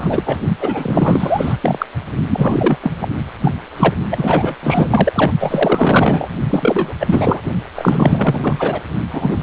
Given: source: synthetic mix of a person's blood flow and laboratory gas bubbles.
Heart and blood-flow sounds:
Doppler ultrasound of blood flow; precordium
0.00-0.22 s: bubbles
0.26-0.39 s: bubbles
0.61-1.56 s: bubbles
1.60-1.86 s: bubbles
2.27-2.78 s: bubbles
2.81-2.92 s: bubbles
3.01-3.08 s: bubbles
3.41-3.54 s: bubbles
3.76-3.94 s: bubbles
4.11-4.54 s: bubbles
4.63-5.12 s: bubbles
5.15-5.33 s: bubbles
5.39-6.28 s: bubbles
6.50-6.93 s: bubbles
7.00-7.42 s: bubbles
7.75-8.80 s: bubbles
9.10-9.43 s: bubbles
From the record:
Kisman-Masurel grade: 444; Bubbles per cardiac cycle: continuous sound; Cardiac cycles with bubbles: 100%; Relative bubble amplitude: maximal (0.775 to 0.999); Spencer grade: 4 (maximum detectable bubble signal sounding continuously throughout systole and diastole of every cardiac period, and overriding the amplitude of the normal cardiac signals); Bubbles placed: only in the low amplitude regions of the cardiac cycle

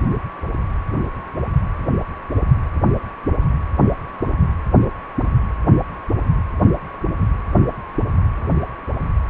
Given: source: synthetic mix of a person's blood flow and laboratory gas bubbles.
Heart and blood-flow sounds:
Doppler ultrasound of blood flow; precordium
no bubbles
From the record:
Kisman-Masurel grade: 000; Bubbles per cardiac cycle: 0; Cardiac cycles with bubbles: 0%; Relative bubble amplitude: no bubbles discernible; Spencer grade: 0 (complete lack of bubble signals)

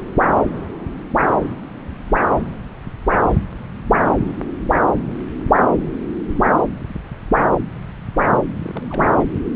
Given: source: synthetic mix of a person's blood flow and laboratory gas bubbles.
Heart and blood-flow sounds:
Doppler ultrasound of blood flow; subclavian vein
8.59-9.13 s: bubbles
9.20-9.24 s: bubbles
From the record:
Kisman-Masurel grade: 211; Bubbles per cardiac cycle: several, 3 to 8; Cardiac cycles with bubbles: 1 to 10%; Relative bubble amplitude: barely perceptible (0.100 to 0.250); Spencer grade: 1 (occasional bubble signal discernible with the cardiac motion signal, with majority of cardiac periods free of bubbles); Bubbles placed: anywhere in the cardiac cycle

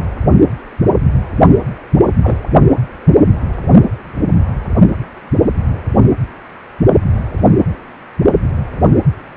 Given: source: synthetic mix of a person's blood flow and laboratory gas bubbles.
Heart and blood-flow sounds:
Doppler ultrasound of blood flow; precordium
2.22-2.37 s: bubbles
From the record:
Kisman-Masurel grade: 113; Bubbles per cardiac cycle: 1 to 2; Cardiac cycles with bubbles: 1 to 10%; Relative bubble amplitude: loud (0.450 to 0.775); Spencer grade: 1 (occasional bubble signal discernible with the cardiac motion signal, with majority of cardiac periods free of bubbles); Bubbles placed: only in the low amplitude regions of the cardiac cycle

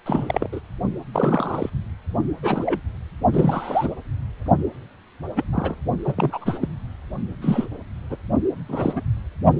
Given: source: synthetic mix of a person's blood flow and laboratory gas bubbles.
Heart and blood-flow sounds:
Doppler ultrasound of blood flow; precordium
0.06-0.49 s: bubbles
0.52-0.59 s: bubbles
1.12-1.70 s: bubbles
2.42-2.80 s: bubbles
3.31-3.93 s: bubbles
5.36-5.45 s: bubbles
5.52-5.75 s: bubbles
6.04-6.68 s: bubbles
7.42-7.67 s: bubbles
8.10-8.16 s: bubbles
8.68-8.93 s: bubbles
8.96-9.02 s: bubbles
From the record:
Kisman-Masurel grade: 242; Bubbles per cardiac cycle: several, 3 to 8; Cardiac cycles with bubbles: 100%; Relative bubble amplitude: moderate (0.250 to 0.450); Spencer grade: 3 (all of the cardiac periods contain showers or single bubble signals, but not dominating or overriding the cardiac motion signals); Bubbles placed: only in the low amplitude regions of the cardiac cycle

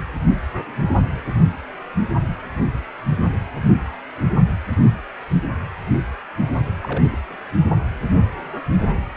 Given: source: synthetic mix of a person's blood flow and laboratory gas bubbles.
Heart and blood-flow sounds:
Doppler ultrasound of blood flow; precordium
6.81-7.18 s: bubbles
7.29-7.37 s: bubbles
From the record:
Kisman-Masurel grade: 211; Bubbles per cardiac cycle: several, 3 to 8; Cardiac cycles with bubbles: 1 to 10%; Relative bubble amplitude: barely perceptible (0.100 to 0.250); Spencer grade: 1 (occasional bubble signal discernible with the cardiac motion signal, with majority of cardiac periods free of bubbles); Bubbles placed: only in the low amplitude regions of the cardiac cycle

